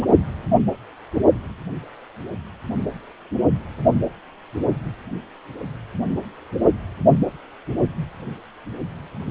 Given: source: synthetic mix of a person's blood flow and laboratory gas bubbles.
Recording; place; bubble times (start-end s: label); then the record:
Doppler ultrasound of blood flow; precordium
0.02-0.06 s: bubbles
From the record:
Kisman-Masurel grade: 212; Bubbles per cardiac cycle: several, 3 to 8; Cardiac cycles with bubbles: 1 to 10%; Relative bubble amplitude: moderate (0.250 to 0.450); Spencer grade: 1 (occasional bubble signal discernible with the cardiac motion signal, with majority of cardiac periods free of bubbles); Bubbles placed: only in the low amplitude regions of the cardiac cycle